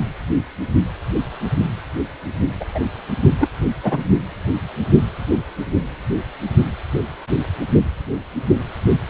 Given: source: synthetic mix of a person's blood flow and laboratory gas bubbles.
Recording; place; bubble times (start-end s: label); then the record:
Doppler ultrasound of blood flow; precordium
2.60-2.65 s: bubbles
2.75-2.79 s: bubbles
3.40-3.48 s: bubbles
3.83-4.04 s: bubbles
From the record:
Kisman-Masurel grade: 113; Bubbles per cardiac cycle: 1 to 2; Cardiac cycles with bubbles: 1 to 10%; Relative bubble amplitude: loud (0.450 to 0.775); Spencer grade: 1 (occasional bubble signal discernible with the cardiac motion signal, with majority of cardiac periods free of bubbles); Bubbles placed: only in the low amplitude regions of the cardiac cycle